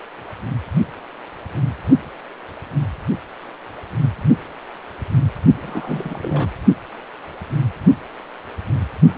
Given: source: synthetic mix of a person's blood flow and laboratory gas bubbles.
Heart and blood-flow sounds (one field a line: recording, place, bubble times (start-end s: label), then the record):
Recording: Doppler ultrasound of blood flow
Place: precordium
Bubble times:
5.62-6.49 s: bubbles
From the record:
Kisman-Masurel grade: 211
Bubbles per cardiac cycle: several, 3 to 8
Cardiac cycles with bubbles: 1 to 10%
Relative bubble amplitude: barely perceptible (0.100 to 0.250)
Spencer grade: 1 (occasional bubble signal discernible with the cardiac motion signal, with majority of cardiac periods free of bubbles)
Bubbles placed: only in the low amplitude regions of the cardiac cycle